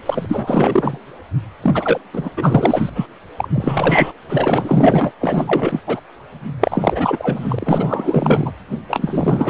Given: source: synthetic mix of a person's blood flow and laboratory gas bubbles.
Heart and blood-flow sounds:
Doppler ultrasound of blood flow; precordium
0.06-0.99 s: bubbles
1.61-2.00 s: bubbles
2.12-2.30 s: bubbles
2.37-2.90 s: bubbles
2.95-3.07 s: bubbles
3.37-3.49 s: bubbles
3.52-4.12 s: bubbles
4.29-5.12 s: bubbles
5.21-5.82 s: bubbles
5.87-6.00 s: bubbles
6.60-8.52 s: bubbles
8.88-9.50 s: bubbles
From the record:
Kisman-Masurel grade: 444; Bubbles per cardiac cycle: continuous sound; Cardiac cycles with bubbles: 100%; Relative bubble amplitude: maximal (0.775 to 0.999); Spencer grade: 4 (maximum detectable bubble signal sounding continuously throughout systole and diastole of every cardiac period, and overriding the amplitude of the normal cardiac signals); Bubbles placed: anywhere in the cardiac cycle

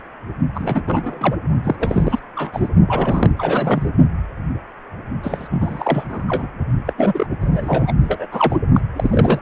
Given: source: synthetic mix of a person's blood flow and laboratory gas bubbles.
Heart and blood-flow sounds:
Doppler ultrasound of blood flow; precordium
0.00-0.02 s: bubbles
0.54-0.82 s: bubbles
0.87-1.36 s: bubbles
1.64-1.76 s: bubbles
1.79-2.19 s: bubbles
2.35-2.69 s: bubbles
2.88-3.32 s: bubbles
3.38-3.90 s: bubbles
5.22-5.48 s: bubbles
5.51-6.47 s: bubbles
6.86-6.93 s: bubbles
6.97-7.26 s: bubbles
7.40-7.92 s: bubbles
8.02-8.27 s: bubbles
8.32-8.59 s: bubbles
8.74-8.81 s: bubbles
8.96-9.40 s: bubbles
From the record:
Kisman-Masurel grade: 332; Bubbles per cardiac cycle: rolling drumbeat, 9 or more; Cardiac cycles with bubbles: 50 to 99%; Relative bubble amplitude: moderate (0.250 to 0.450); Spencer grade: 3 (all of the cardiac periods contain showers or single bubble signals, but not dominating or overriding the cardiac motion signals); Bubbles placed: only in the low amplitude regions of the cardiac cycle

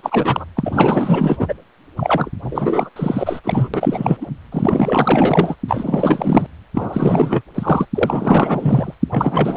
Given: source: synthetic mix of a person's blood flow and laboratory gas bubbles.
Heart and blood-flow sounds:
Doppler ultrasound of blood flow; precordium
0.00-0.45 s: bubbles
0.56-1.54 s: bubbles
1.96-2.31 s: bubbles
2.42-2.90 s: bubbles
2.96-3.40 s: bubbles
3.44-3.69 s: bubbles
3.74-4.17 s: bubbles
4.21-4.28 s: bubbles
4.52-5.55 s: bubbles
5.68-6.46 s: bubbles
6.75-7.42 s: bubbles
7.54-7.85 s: bubbles
7.94-8.95 s: bubbles
9.11-9.57 s: bubbles
From the record:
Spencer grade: 4 (maximum detectable bubble signal sounding continuously throughout systole and diastole of every cardiac period, and overriding the amplitude of the normal cardiac signals); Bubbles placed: anywhere in the cardiac cycle

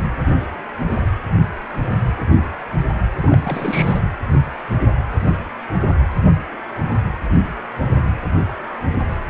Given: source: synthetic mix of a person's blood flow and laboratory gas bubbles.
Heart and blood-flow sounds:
Doppler ultrasound of blood flow; precordium
3.21-3.38 s: bubbles
3.44-3.99 s: bubbles
From the record:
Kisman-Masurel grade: 211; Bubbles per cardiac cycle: several, 3 to 8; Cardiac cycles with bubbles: 1 to 10%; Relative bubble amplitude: barely perceptible (0.100 to 0.250); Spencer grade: 1 (occasional bubble signal discernible with the cardiac motion signal, with majority of cardiac periods free of bubbles); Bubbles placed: anywhere in the cardiac cycle

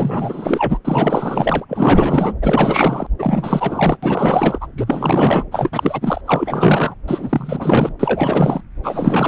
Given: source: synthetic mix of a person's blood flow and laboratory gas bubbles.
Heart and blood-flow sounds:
Doppler ultrasound of blood flow; subclavian vein
0.00-0.78 s: bubbles
0.85-1.65 s: bubbles
1.68-2.33 s: bubbles
2.42-3.06 s: bubbles
3.18-3.98 s: bubbles
4.03-4.68 s: bubbles
4.77-5.45 s: bubbles
5.52-6.21 s: bubbles
6.26-6.94 s: bubbles
7.07-7.94 s: bubbles
7.99-8.61 s: bubbles
8.83-9.28 s: bubbles
From the record:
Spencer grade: 4 (maximum detectable bubble signal sounding continuously throughout systole and diastole of every cardiac period, and overriding the amplitude of the normal cardiac signals); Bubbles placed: anywhere in the cardiac cycle

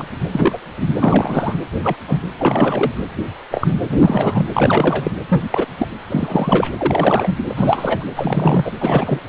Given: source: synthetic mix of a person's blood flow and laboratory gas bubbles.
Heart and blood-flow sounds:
Doppler ultrasound of blood flow; precordium
0.00-0.06 s: bubbles
0.31-0.58 s: bubbles
0.77-0.87 s: bubbles
0.99-1.55 s: bubbles
1.83-1.97 s: bubbles
2.07-2.19 s: bubbles
2.38-2.92 s: bubbles
3.51-3.77 s: bubbles
3.99-4.46 s: bubbles
4.54-5.11 s: bubbles
5.28-5.42 s: bubbles
5.50-5.67 s: bubbles
5.78-5.86 s: bubbles
6.09-6.71 s: bubbles
6.78-7.37 s: bubbles
7.49-8.05 s: bubbles
8.16-8.71 s: bubbles
8.80-9.19 s: bubbles
From the record:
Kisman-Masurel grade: 243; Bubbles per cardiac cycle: several, 3 to 8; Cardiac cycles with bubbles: 100%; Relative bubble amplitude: loud (0.450 to 0.775); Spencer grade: 3 (all of the cardiac periods contain showers or single bubble signals, but not dominating or overriding the cardiac motion signals); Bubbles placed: anywhere in the cardiac cycle

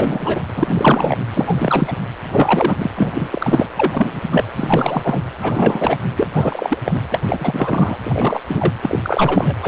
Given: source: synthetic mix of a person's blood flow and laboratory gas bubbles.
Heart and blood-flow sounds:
Doppler ultrasound of blood flow; precordium
0.00-0.41 s: bubbles
0.56-1.17 s: bubbles
1.33-1.93 s: bubbles
2.31-2.74 s: bubbles
2.78-2.90 s: bubbles
2.96-3.28 s: bubbles
3.31-3.66 s: bubbles
3.77-4.21 s: bubbles
4.31-4.45 s: bubbles
4.56-5.22 s: bubbles
5.41-5.98 s: bubbles
6.17-6.27 s: bubbles
6.33-6.78 s: bubbles
6.85-7.01 s: bubbles
7.12-7.21 s: bubbles
7.27-7.97 s: bubbles
8.04-8.39 s: bubbles
8.48-8.73 s: bubbles
8.82-8.99 s: bubbles
9.03-9.55 s: bubbles
9.62-9.68 s: bubbles
From the record:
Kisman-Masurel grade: 333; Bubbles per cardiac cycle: rolling drumbeat, 9 or more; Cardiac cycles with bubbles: 50 to 99%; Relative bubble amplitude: loud (0.450 to 0.775); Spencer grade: 3 (all of the cardiac periods contain showers or single bubble signals, but not dominating or overriding the cardiac motion signals); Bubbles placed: anywhere in the cardiac cycle

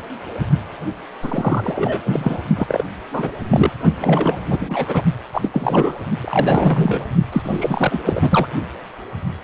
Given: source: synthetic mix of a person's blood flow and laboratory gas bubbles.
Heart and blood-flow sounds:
Doppler ultrasound of blood flow; precordium
1.22-2.00 s: bubbles
2.05-2.45 s: bubbles
2.55-2.83 s: bubbles
3.12-3.32 s: bubbles
3.50-3.71 s: bubbles
4.01-4.45 s: bubbles
4.50-5.02 s: bubbles
5.33-5.49 s: bubbles
5.54-5.96 s: bubbles
6.22-7.05 s: bubbles
7.32-8.00 s: bubbles
8.05-8.48 s: bubbles
From the record:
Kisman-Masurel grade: 332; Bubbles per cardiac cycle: rolling drumbeat, 9 or more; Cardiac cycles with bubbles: 50 to 99%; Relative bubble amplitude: moderate (0.250 to 0.450); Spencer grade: 3 (all of the cardiac periods contain showers or single bubble signals, but not dominating or overriding the cardiac motion signals); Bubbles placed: only in the low amplitude regions of the cardiac cycle

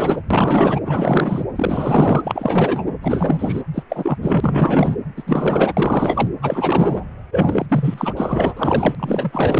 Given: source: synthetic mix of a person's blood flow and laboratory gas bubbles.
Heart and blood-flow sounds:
Doppler ultrasound of blood flow; precordium
0.00-0.22 s: bubbles
0.30-0.79 s: bubbles
0.85-1.45 s: bubbles
1.55-2.87 s: bubbles
3.02-3.62 s: bubbles
3.74-3.83 s: bubbles
3.89-4.18 s: bubbles
4.22-4.97 s: bubbles
5.16-5.23 s: bubbles
5.26-5.74 s: bubbles
5.76-6.28 s: bubbles
6.41-7.05 s: bubbles
7.30-7.66 s: bubbles
7.68-8.95 s: bubbles
8.99-9.60 s: bubbles
From the record:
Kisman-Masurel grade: 444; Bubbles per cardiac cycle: continuous sound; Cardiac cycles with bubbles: 100%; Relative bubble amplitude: maximal (0.775 to 0.999); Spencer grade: 4 (maximum detectable bubble signal sounding continuously throughout systole and diastole of every cardiac period, and overriding the amplitude of the normal cardiac signals); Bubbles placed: anywhere in the cardiac cycle

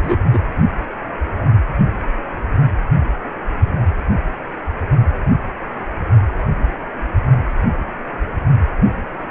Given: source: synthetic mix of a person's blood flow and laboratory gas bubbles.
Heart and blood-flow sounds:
Doppler ultrasound of blood flow; precordium
0.02-0.16 s: bubbles
0.33-0.39 s: bubbles
From the record:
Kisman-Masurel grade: 113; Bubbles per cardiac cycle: 1 to 2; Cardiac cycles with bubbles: 1 to 10%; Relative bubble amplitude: loud (0.450 to 0.775); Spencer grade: 1 (occasional bubble signal discernible with the cardiac motion signal, with majority of cardiac periods free of bubbles); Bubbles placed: only in the low amplitude regions of the cardiac cycle

